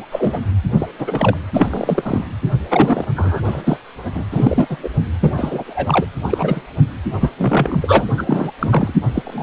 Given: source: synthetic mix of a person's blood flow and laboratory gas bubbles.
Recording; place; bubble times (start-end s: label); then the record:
Doppler ultrasound of blood flow; precordium
0.00-0.05 s: bubbles
0.11-0.41 s: bubbles
0.79-0.87 s: bubbles
0.98-1.37 s: bubbles
1.54-2.25 s: bubbles
2.69-3.04 s: bubbles
3.16-3.40 s: bubbles
3.44-3.77 s: bubbles
4.14-4.24 s: bubbles
4.30-4.77 s: bubbles
4.83-4.89 s: bubbles
5.20-5.31 s: bubbles
5.37-6.06 s: bubbles
6.22-6.61 s: bubbles
7.20-7.30 s: bubbles
7.38-8.06 s: bubbles
8.17-8.24 s: bubbles
8.27-8.51 s: bubbles
8.59-8.94 s: bubbles
9.14-9.22 s: bubbles
9.25-9.43 s: bubbles
From the record:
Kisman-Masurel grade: 233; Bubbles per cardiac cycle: several, 3 to 8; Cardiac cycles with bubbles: 50 to 99%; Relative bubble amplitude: loud (0.450 to 0.775); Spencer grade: 3 (all of the cardiac periods contain showers or single bubble signals, but not dominating or overriding the cardiac motion signals); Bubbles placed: anywhere in the cardiac cycle